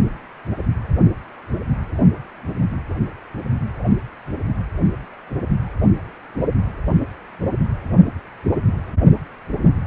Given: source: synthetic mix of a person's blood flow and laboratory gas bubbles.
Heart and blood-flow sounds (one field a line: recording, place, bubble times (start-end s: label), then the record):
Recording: Doppler ultrasound of blood flow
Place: precordium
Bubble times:
no bubbles
From the record:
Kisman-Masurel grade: 000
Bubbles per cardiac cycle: 0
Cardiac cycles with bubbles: 0%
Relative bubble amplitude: no bubbles discernible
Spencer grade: 0 (complete lack of bubble signals)